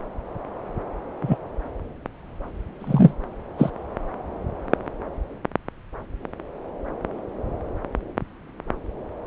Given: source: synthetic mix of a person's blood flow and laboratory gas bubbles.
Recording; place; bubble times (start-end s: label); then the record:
Doppler ultrasound of blood flow; subclavian vein
1.21-1.36 s: bubbles
2.80-3.13 s: bubbles
3.58-3.70 s: bubbles
From the record:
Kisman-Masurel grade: 123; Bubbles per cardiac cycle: 1 to 2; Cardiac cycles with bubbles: 10 to 50%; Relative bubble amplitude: loud (0.450 to 0.775); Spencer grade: 2 (many but less than half of the cardiac periods contain bubble signals, singularly or in groups); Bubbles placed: anywhere in the cardiac cycle